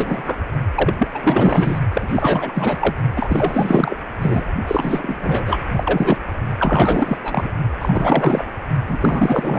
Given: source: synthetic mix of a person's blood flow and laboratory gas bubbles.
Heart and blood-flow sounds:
Doppler ultrasound of blood flow; precordium
0.00-0.41 s: bubbles
0.75-0.92 s: bubbles
0.98-1.08 s: bubbles
1.14-1.79 s: bubbles
1.93-2.96 s: bubbles
3.15-3.97 s: bubbles
4.17-4.45 s: bubbles
4.67-5.61 s: bubbles
5.72-6.19 s: bubbles
6.58-7.17 s: bubbles
7.23-7.50 s: bubbles
7.79-8.50 s: bubbles
8.88-9.59 s: bubbles
From the record:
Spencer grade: 4 (maximum detectable bubble signal sounding continuously throughout systole and diastole of every cardiac period, and overriding the amplitude of the normal cardiac signals); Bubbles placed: only in the low amplitude regions of the cardiac cycle

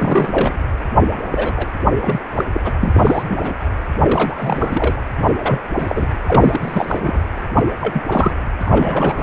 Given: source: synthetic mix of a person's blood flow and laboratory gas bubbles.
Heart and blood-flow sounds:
Doppler ultrasound of blood flow; precordium
0.00-0.65 s: bubbles
1.32-1.66 s: bubbles
2.01-2.20 s: bubbles
2.37-2.45 s: bubbles
2.54-2.61 s: bubbles
2.64-2.72 s: bubbles
2.81-3.54 s: bubbles
4.03-5.01 s: bubbles
5.28-5.60 s: bubbles
5.78-6.07 s: bubbles
6.26-7.24 s: bubbles
7.55-7.63 s: bubbles
7.81-8.03 s: bubbles
8.09-8.32 s: bubbles
8.60-9.23 s: bubbles
From the record:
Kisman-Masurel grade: 342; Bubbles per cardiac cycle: rolling drumbeat, 9 or more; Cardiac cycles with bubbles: 100%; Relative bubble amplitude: moderate (0.250 to 0.450); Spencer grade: 3 (all of the cardiac periods contain showers or single bubble signals, but not dominating or overriding the cardiac motion signals); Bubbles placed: anywhere in the cardiac cycle

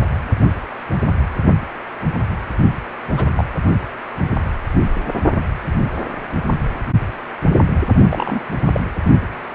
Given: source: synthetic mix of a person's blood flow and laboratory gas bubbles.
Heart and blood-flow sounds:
Doppler ultrasound of blood flow; precordium
3.17-3.29 s: bubbles
3.35-3.45 s: bubbles
8.08-8.40 s: bubbles
8.72-8.80 s: bubbles
From the record:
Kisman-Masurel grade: 122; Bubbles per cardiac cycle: 1 to 2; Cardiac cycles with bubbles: 10 to 50%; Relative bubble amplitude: moderate (0.250 to 0.450); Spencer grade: 2 (many but less than half of the cardiac periods contain bubble signals, singularly or in groups); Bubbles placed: only in the low amplitude regions of the cardiac cycle

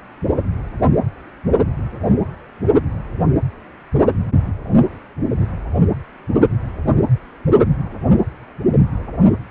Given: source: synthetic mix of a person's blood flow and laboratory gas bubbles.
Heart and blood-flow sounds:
Doppler ultrasound of blood flow; precordium
no bubbles
From the record:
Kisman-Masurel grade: 000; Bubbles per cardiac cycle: 0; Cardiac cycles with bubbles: 0%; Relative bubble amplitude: no bubbles discernible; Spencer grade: 0 (complete lack of bubble signals)

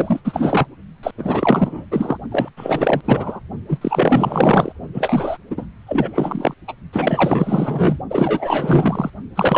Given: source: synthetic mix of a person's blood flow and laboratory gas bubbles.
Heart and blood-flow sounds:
Doppler ultrasound of blood flow; precordium
0.00-0.20 s: bubbles
0.24-0.66 s: bubbles
1.03-1.11 s: bubbles
1.18-1.86 s: bubbles
1.91-2.18 s: bubbles
2.31-2.50 s: bubbles
2.56-3.01 s: bubbles
3.05-3.40 s: bubbles
3.68-3.78 s: bubbles
3.81-4.72 s: bubbles
4.94-5.38 s: bubbles
5.50-5.65 s: bubbles
5.86-6.54 s: bubbles
6.67-6.74 s: bubbles
6.92-7.97 s: bubbles
8.09-9.10 s: bubbles
9.36-9.58 s: bubbles
From the record:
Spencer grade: 4 (maximum detectable bubble signal sounding continuously throughout systole and diastole of every cardiac period, and overriding the amplitude of the normal cardiac signals); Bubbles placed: only in the low amplitude regions of the cardiac cycle

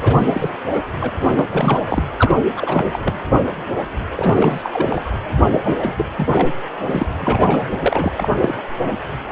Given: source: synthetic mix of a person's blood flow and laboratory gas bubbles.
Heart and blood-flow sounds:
Doppler ultrasound of blood flow; precordium
0.01-0.50 s: bubbles
0.63-0.79 s: bubbles
1.00-1.09 s: bubbles
1.21-1.46 s: bubbles
1.51-1.80 s: bubbles
1.89-2.02 s: bubbles
2.17-2.35 s: bubbles
2.56-2.99 s: bubbles
3.04-3.15 s: bubbles
4.17-5.02 s: bubbles
5.43-5.59 s: bubbles
5.62-6.05 s: bubbles
6.17-6.53 s: bubbles
6.87-7.06 s: bubbles
7.20-7.67 s: bubbles
7.71-7.76 s: bubbles
7.80-8.12 s: bubbles
8.17-8.29 s: bubbles
8.42-8.55 s: bubbles
From the record:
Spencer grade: 3 (all of the cardiac periods contain showers or single bubble signals, but not dominating or overriding the cardiac motion signals); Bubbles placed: anywhere in the cardiac cycle

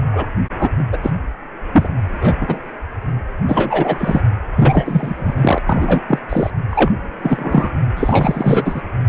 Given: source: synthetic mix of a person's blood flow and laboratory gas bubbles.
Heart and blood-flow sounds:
Doppler ultrasound of blood flow; precordium
0.12-0.27 s: bubbles
0.58-0.69 s: bubbles
0.78-0.84 s: bubbles
0.92-0.97 s: bubbles
1.03-1.11 s: bubbles
1.73-1.89 s: bubbles
2.08-2.36 s: bubbles
2.41-2.59 s: bubbles
3.48-4.21 s: bubbles
4.55-5.58 s: bubbles
5.67-6.01 s: bubbles
6.08-6.20 s: bubbles
6.29-6.50 s: bubbles
6.71-6.92 s: bubbles
7.23-7.69 s: bubbles
7.96-8.81 s: bubbles
From the record:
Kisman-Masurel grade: 243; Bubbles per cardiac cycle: several, 3 to 8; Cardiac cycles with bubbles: 100%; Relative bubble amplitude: loud (0.450 to 0.775); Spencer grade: 3 (all of the cardiac periods contain showers or single bubble signals, but not dominating or overriding the cardiac motion signals); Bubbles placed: anywhere in the cardiac cycle

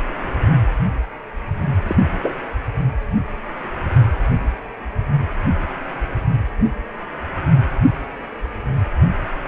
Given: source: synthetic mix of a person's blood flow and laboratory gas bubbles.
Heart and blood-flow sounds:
Doppler ultrasound of blood flow; precordium
1.87-1.96 s: bubbles
2.23-2.33 s: bubbles
From the record:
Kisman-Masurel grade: 112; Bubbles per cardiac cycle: 1 to 2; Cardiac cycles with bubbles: 1 to 10%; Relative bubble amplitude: moderate (0.250 to 0.450); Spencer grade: 1 (occasional bubble signal discernible with the cardiac motion signal, with majority of cardiac periods free of bubbles); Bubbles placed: anywhere in the cardiac cycle

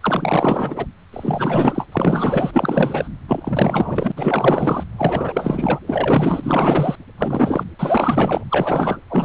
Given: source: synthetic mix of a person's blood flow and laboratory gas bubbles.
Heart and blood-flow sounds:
Doppler ultrasound of blood flow; precordium
0.00-0.85 s: bubbles
1.12-1.87 s: bubbles
1.92-3.08 s: bubbles
3.28-4.12 s: bubbles
4.17-4.84 s: bubbles
4.97-5.79 s: bubbles
5.86-6.96 s: bubbles
7.17-7.63 s: bubbles
7.79-8.44 s: bubbles
8.49-8.98 s: bubbles
9.08-9.25 s: bubbles
From the record:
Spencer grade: 4 (maximum detectable bubble signal sounding continuously throughout systole and diastole of every cardiac period, and overriding the amplitude of the normal cardiac signals); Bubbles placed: anywhere in the cardiac cycle

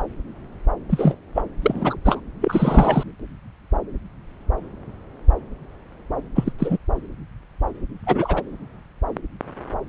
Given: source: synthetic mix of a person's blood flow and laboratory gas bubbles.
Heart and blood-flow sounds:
Doppler ultrasound of blood flow; subclavian vein
0.89-1.18 s: bubbles
1.34-1.43 s: bubbles
1.62-1.97 s: bubbles
2.05-2.20 s: bubbles
2.41-3.04 s: bubbles
6.36-6.53 s: bubbles
6.58-6.78 s: bubbles
8.06-8.42 s: bubbles
From the record:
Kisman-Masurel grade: 223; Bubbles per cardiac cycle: several, 3 to 8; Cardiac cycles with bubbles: 10 to 50%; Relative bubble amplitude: loud (0.450 to 0.775); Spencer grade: 2 (many but less than half of the cardiac periods contain bubble signals, singularly or in groups); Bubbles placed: anywhere in the cardiac cycle

